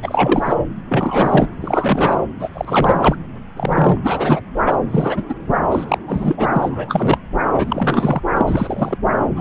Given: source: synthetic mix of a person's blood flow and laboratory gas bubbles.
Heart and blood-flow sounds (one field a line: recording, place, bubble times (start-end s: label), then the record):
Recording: Doppler ultrasound of blood flow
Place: subclavian vein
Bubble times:
0.03-0.56 s: bubbles
0.88-1.48 s: bubbles
1.60-2.23 s: bubbles
2.39-2.50 s: bubbles
2.54-3.16 s: bubbles
3.56-3.98 s: bubbles
4.04-4.41 s: bubbles
4.66-4.78 s: bubbles
4.91-5.23 s: bubbles
5.29-5.34 s: bubbles
5.71-5.84 s: bubbles
5.88-5.99 s: bubbles
6.07-6.49 s: bubbles
6.52-7.18 s: bubbles
7.53-8.20 s: bubbles
8.37-8.98 s: bubbles
9.36-9.41 s: bubbles
From the record:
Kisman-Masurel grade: 343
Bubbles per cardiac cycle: rolling drumbeat, 9 or more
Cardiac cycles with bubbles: 100%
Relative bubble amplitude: loud (0.450 to 0.775)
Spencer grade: 3 (all of the cardiac periods contain showers or single bubble signals, but not dominating or overriding the cardiac motion signals)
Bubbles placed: anywhere in the cardiac cycle